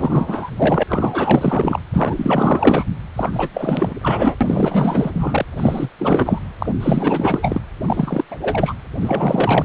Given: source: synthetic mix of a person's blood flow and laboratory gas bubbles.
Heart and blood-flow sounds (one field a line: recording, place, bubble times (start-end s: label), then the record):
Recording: Doppler ultrasound of blood flow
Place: precordium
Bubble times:
0.00-0.51 s: bubbles
0.57-0.83 s: bubbles
0.89-1.79 s: bubbles
1.93-2.85 s: bubbles
3.16-3.49 s: bubbles
3.54-3.94 s: bubbles
4.01-4.35 s: bubbles
4.41-5.46 s: bubbles
5.57-5.90 s: bubbles
5.99-6.39 s: bubbles
6.58-6.72 s: bubbles
6.81-7.62 s: bubbles
7.87-8.24 s: bubbles
8.30-8.38 s: bubbles
8.42-8.74 s: bubbles
9.02-9.65 s: bubbles
From the record:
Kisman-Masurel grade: 444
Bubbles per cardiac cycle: continuous sound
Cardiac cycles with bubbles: 100%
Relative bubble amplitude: maximal (0.775 to 0.999)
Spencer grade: 4 (maximum detectable bubble signal sounding continuously throughout systole and diastole of every cardiac period, and overriding the amplitude of the normal cardiac signals)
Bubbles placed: anywhere in the cardiac cycle